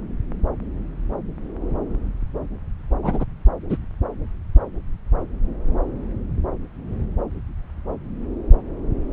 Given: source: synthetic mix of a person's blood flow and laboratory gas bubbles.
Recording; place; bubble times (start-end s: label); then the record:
Doppler ultrasound of blood flow; subclavian vein
3.02-3.25 s: bubbles
3.70-3.78 s: bubbles
From the record:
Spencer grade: 2 (many but less than half of the cardiac periods contain bubble signals, singularly or in groups); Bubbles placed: anywhere in the cardiac cycle